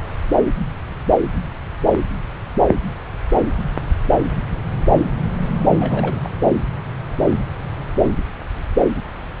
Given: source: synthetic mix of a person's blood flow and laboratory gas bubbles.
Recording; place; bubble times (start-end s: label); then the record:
Doppler ultrasound of blood flow; subclavian vein
5.79-6.38 s: bubbles
From the record:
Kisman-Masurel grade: 211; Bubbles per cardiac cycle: several, 3 to 8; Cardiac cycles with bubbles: 1 to 10%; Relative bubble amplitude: barely perceptible (0.100 to 0.250); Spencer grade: 1 (occasional bubble signal discernible with the cardiac motion signal, with majority of cardiac periods free of bubbles); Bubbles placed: anywhere in the cardiac cycle